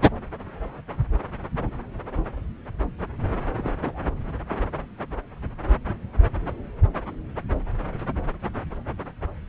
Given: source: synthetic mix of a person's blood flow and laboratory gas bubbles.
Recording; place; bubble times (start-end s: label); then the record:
Doppler ultrasound of blood flow; subclavian vein
3.58-3.71 s: bubbles
3.81-4.12 s: bubbles
From the record:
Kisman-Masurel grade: 111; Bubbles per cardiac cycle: 1 to 2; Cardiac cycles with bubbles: 1 to 10%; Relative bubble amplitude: barely perceptible (0.100 to 0.250); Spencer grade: 1 (occasional bubble signal discernible with the cardiac motion signal, with majority of cardiac periods free of bubbles); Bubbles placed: anywhere in the cardiac cycle